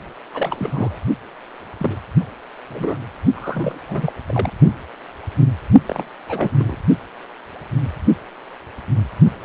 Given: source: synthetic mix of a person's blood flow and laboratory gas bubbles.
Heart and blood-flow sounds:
Doppler ultrasound of blood flow; precordium
0.34-0.98 s: bubbles
1.78-1.98 s: bubbles
2.69-2.98 s: bubbles
3.35-3.78 s: bubbles
3.88-4.12 s: bubbles
4.26-4.51 s: bubbles
5.86-6.04 s: bubbles
6.28-6.76 s: bubbles
From the record:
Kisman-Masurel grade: 222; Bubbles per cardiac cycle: several, 3 to 8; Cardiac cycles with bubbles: 10 to 50%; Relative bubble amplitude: moderate (0.250 to 0.450); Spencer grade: 2 (many but less than half of the cardiac periods contain bubble signals, singularly or in groups); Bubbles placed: only in the low amplitude regions of the cardiac cycle

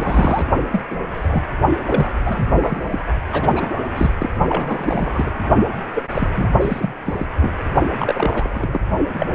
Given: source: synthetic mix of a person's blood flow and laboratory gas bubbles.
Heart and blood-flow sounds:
Doppler ultrasound of blood flow; precordium
0.00-0.47 s: bubbles
0.72-0.82 s: bubbles
0.91-0.97 s: bubbles
1.10-1.44 s: bubbles
1.86-2.12 s: bubbles
2.25-2.46 s: bubbles
2.49-3.05 s: bubbles
3.32-3.74 s: bubbles
3.95-4.11 s: bubbles
4.19-4.30 s: bubbles
4.48-5.31 s: bubbles
5.95-6.03 s: bubbles
6.11-6.28 s: bubbles
6.35-6.53 s: bubbles
6.61-6.93 s: bubbles
7.06-7.26 s: bubbles
7.40-7.53 s: bubbles
7.98-8.80 s: bubbles
9.13-9.27 s: bubbles
From the record:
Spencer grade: 3 (all of the cardiac periods contain showers or single bubble signals, but not dominating or overriding the cardiac motion signals); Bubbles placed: only in the low amplitude regions of the cardiac cycle

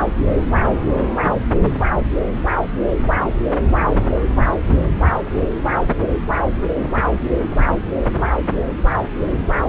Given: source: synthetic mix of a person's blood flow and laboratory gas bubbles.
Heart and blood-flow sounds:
Doppler ultrasound of blood flow; subclavian vein
no bubbles
From the record:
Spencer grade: 0 (complete lack of bubble signals)

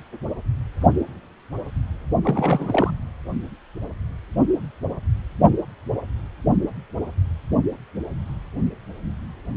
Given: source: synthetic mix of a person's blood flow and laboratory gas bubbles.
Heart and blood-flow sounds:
Doppler ultrasound of blood flow; precordium
2.22-2.91 s: bubbles
From the record:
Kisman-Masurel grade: 222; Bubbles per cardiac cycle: several, 3 to 8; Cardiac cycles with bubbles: 10 to 50%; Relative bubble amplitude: moderate (0.250 to 0.450); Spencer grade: 2 (many but less than half of the cardiac periods contain bubble signals, singularly or in groups); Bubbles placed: only in the low amplitude regions of the cardiac cycle

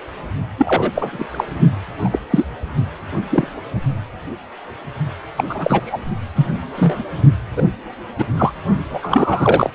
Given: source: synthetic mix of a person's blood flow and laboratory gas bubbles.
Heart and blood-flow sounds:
Doppler ultrasound of blood flow; precordium
0.57-0.92 s: bubbles
0.94-1.26 s: bubbles
1.31-1.44 s: bubbles
2.04-2.19 s: bubbles
2.30-2.46 s: bubbles
3.31-3.48 s: bubbles
5.37-5.81 s: bubbles
5.85-6.00 s: bubbles
6.36-6.48 s: bubbles
6.52-6.58 s: bubbles
6.75-7.03 s: bubbles
7.56-7.63 s: bubbles
8.18-8.26 s: bubbles
8.37-8.53 s: bubbles
8.90-9.72 s: bubbles
From the record:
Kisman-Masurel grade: 233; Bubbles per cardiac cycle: several, 3 to 8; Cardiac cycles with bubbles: 50 to 99%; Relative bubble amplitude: loud (0.450 to 0.775); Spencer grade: 3 (all of the cardiac periods contain showers or single bubble signals, but not dominating or overriding the cardiac motion signals); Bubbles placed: only in the low amplitude regions of the cardiac cycle

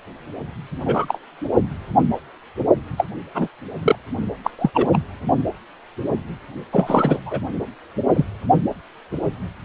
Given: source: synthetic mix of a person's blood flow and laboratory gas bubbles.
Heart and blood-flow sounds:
Doppler ultrasound of blood flow; precordium
0.85-1.05 s: bubbles
1.08-1.18 s: bubbles
2.97-3.06 s: bubbles
3.34-3.48 s: bubbles
3.82-3.95 s: bubbles
4.44-4.50 s: bubbles
4.58-4.71 s: bubbles
4.74-4.87 s: bubbles
4.92-5.00 s: bubbles
6.73-7.20 s: bubbles
7.25-7.40 s: bubbles
8.13-8.25 s: bubbles
From the record:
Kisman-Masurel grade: 233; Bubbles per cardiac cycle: several, 3 to 8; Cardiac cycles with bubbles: 50 to 99%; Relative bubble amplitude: loud (0.450 to 0.775); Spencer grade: 3 (all of the cardiac periods contain showers or single bubble signals, but not dominating or overriding the cardiac motion signals); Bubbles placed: only in the low amplitude regions of the cardiac cycle

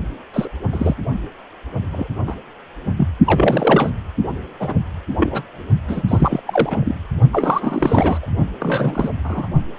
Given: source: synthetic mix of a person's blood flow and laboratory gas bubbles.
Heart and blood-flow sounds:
Doppler ultrasound of blood flow; precordium
0.33-0.48 s: bubbles
0.72-0.94 s: bubbles
1.92-2.08 s: bubbles
2.27-2.35 s: bubbles
2.97-3.08 s: bubbles
3.25-3.90 s: bubbles
4.59-4.74 s: bubbles
5.18-5.44 s: bubbles
5.88-6.02 s: bubbles
6.08-6.42 s: bubbles
6.46-6.96 s: bubbles
7.32-8.27 s: bubbles
8.60-9.09 s: bubbles
9.23-9.48 s: bubbles
From the record:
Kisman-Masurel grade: 243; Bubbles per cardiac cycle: several, 3 to 8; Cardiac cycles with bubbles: 100%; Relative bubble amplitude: loud (0.450 to 0.775); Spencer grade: 3 (all of the cardiac periods contain showers or single bubble signals, but not dominating or overriding the cardiac motion signals); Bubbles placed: only in the low amplitude regions of the cardiac cycle

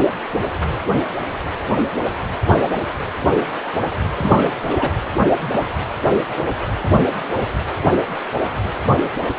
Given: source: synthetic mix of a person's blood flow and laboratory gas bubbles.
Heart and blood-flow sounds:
Doppler ultrasound of blood flow; precordium
4.18-4.55 s: bubbles
4.67-4.90 s: bubbles
From the record:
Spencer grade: 1 (occasional bubble signal discernible with the cardiac motion signal, with majority of cardiac periods free of bubbles); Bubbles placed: anywhere in the cardiac cycle

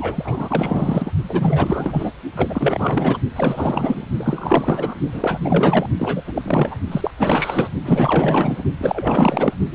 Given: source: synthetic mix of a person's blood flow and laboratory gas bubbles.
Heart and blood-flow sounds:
Doppler ultrasound of blood flow; precordium
0.00-1.11 s: bubbles
1.29-2.11 s: bubbles
2.36-3.18 s: bubbles
3.35-4.06 s: bubbles
4.18-4.95 s: bubbles
5.12-5.88 s: bubbles
5.98-6.21 s: bubbles
6.26-6.78 s: bubbles
6.91-7.11 s: bubbles
7.18-7.71 s: bubbles
7.85-8.63 s: bubbles
8.78-9.54 s: bubbles
9.71-9.75 s: bubbles
From the record:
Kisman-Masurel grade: 444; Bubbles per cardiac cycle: continuous sound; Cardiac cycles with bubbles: 100%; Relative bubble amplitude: maximal (0.775 to 0.999); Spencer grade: 4 (maximum detectable bubble signal sounding continuously throughout systole and diastole of every cardiac period, and overriding the amplitude of the normal cardiac signals); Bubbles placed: only in the low amplitude regions of the cardiac cycle

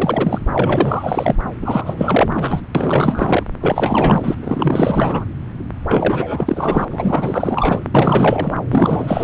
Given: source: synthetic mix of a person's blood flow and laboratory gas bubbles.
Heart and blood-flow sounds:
Doppler ultrasound of blood flow; subclavian vein
0.00-0.39 s: bubbles
0.52-1.35 s: bubbles
1.62-2.60 s: bubbles
2.75-3.43 s: bubbles
3.61-4.35 s: bubbles
4.42-5.25 s: bubbles
5.88-6.85 s: bubbles
6.91-7.80 s: bubbles
7.94-8.60 s: bubbles
8.71-9.23 s: bubbles
From the record:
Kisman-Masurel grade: 444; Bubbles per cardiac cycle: continuous sound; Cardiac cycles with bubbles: 100%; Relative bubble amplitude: maximal (0.775 to 0.999); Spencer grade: 4 (maximum detectable bubble signal sounding continuously throughout systole and diastole of every cardiac period, and overriding the amplitude of the normal cardiac signals); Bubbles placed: anywhere in the cardiac cycle

